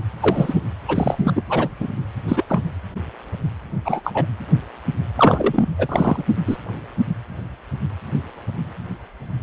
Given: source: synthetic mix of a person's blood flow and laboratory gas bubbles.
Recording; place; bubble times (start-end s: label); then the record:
Doppler ultrasound of blood flow; precordium
0.20-0.54 s: bubbles
0.88-1.33 s: bubbles
1.35-1.42 s: bubbles
1.49-1.68 s: bubbles
1.79-1.88 s: bubbles
2.28-2.44 s: bubbles
2.49-2.61 s: bubbles
3.85-4.01 s: bubbles
4.04-4.12 s: bubbles
4.14-4.25 s: bubbles
5.17-5.63 s: bubbles
5.78-6.23 s: bubbles
6.46-6.57 s: bubbles
From the record:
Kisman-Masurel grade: 233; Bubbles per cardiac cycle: several, 3 to 8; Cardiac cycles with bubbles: 50 to 99%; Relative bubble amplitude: loud (0.450 to 0.775); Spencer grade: 3 (all of the cardiac periods contain showers or single bubble signals, but not dominating or overriding the cardiac motion signals); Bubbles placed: anywhere in the cardiac cycle